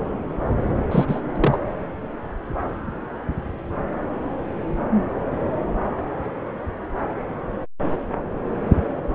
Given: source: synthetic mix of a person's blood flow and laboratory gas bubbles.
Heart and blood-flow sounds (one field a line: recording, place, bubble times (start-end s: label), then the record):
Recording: Doppler ultrasound of blood flow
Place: subclavian vein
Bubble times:
0.91-1.22 s: bubbles
1.35-1.58 s: bubbles
From the record:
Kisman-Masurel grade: 213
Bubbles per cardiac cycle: several, 3 to 8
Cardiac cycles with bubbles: 1 to 10%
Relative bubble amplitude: loud (0.450 to 0.775)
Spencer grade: 1 (occasional bubble signal discernible with the cardiac motion signal, with majority of cardiac periods free of bubbles)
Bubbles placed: anywhere in the cardiac cycle